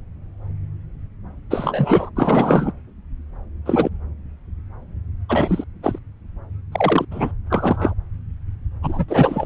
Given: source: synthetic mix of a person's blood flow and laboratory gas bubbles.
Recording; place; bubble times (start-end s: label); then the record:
Doppler ultrasound of blood flow; subclavian vein
1.50-2.09 s: bubbles
2.15-2.73 s: bubbles
3.65-3.90 s: bubbles
5.29-5.64 s: bubbles
5.83-5.99 s: bubbles
6.72-7.05 s: bubbles
7.11-7.31 s: bubbles
7.50-7.94 s: bubbles
8.82-9.05 s: bubbles
9.08-9.46 s: bubbles
From the record:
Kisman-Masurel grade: 233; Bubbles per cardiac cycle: several, 3 to 8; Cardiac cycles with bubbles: 50 to 99%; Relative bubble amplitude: loud (0.450 to 0.775); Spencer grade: 3 (all of the cardiac periods contain showers or single bubble signals, but not dominating or overriding the cardiac motion signals); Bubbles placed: anywhere in the cardiac cycle